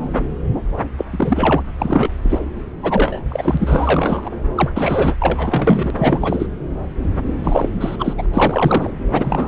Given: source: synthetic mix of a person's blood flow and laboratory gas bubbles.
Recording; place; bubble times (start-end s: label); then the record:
Doppler ultrasound of blood flow; subclavian vein
0.97-1.05 s: bubbles
1.10-1.62 s: bubbles
1.78-2.10 s: bubbles
2.24-2.39 s: bubbles
2.83-3.24 s: bubbles
3.29-4.30 s: bubbles
4.55-4.70 s: bubbles
4.75-5.15 s: bubbles
5.21-5.91 s: bubbles
5.98-6.49 s: bubbles
7.43-7.69 s: bubbles
7.80-8.13 s: bubbles
8.16-8.26 s: bubbles
8.33-8.90 s: bubbles
9.13-9.48 s: bubbles
From the record:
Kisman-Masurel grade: 333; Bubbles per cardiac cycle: rolling drumbeat, 9 or more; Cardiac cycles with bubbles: 50 to 99%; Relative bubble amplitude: loud (0.450 to 0.775); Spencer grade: 3 (all of the cardiac periods contain showers or single bubble signals, but not dominating or overriding the cardiac motion signals); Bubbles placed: anywhere in the cardiac cycle